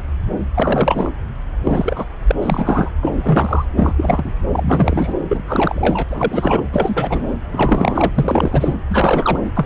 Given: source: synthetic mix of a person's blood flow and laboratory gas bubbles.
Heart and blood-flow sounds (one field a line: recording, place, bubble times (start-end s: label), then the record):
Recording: Doppler ultrasound of blood flow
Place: subclavian vein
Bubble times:
0.54-1.10 s: bubbles
1.64-2.04 s: bubbles
2.27-2.32 s: bubbles
2.40-2.90 s: bubbles
3.02-3.11 s: bubbles
3.16-3.65 s: bubbles
3.76-3.94 s: bubbles
3.97-4.33 s: bubbles
4.51-5.14 s: bubbles
5.29-5.43 s: bubbles
5.46-6.03 s: bubbles
6.10-6.62 s: bubbles
6.73-7.26 s: bubbles
7.52-8.75 s: bubbles
8.88-9.39 s: bubbles
9.45-9.51 s: bubbles
9.54-9.65 s: bubbles
From the record:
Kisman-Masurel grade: 333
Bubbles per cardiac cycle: rolling drumbeat, 9 or more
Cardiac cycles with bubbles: 50 to 99%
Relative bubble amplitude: loud (0.450 to 0.775)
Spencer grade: 3 (all of the cardiac periods contain showers or single bubble signals, but not dominating or overriding the cardiac motion signals)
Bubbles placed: anywhere in the cardiac cycle